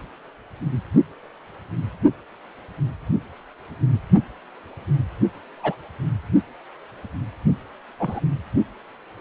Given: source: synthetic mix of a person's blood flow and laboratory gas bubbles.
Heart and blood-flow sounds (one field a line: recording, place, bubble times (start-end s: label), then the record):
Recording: Doppler ultrasound of blood flow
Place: precordium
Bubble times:
5.57-5.75 s: bubbles
7.99-8.20 s: bubbles
From the record:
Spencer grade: 2 (many but less than half of the cardiac periods contain bubble signals, singularly or in groups)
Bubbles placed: only in the low amplitude regions of the cardiac cycle